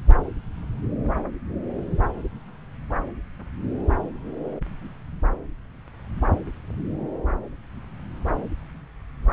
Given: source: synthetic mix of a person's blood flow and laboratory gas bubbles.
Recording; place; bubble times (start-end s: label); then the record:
Doppler ultrasound of blood flow; subclavian vein
no bubbles
From the record:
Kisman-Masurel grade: 000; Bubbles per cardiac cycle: 0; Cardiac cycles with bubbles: 0%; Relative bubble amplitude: no bubbles discernible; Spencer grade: 0 (complete lack of bubble signals)